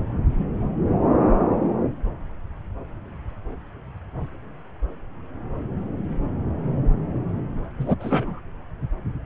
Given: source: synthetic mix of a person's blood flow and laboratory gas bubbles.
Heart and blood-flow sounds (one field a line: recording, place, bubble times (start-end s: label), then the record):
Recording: Doppler ultrasound of blood flow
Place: subclavian vein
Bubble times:
7.78-7.95 s: bubbles
8.00-8.40 s: bubbles
From the record:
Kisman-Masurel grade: 213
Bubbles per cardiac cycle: several, 3 to 8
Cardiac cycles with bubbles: 1 to 10%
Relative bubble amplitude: loud (0.450 to 0.775)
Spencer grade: 1 (occasional bubble signal discernible with the cardiac motion signal, with majority of cardiac periods free of bubbles)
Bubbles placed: anywhere in the cardiac cycle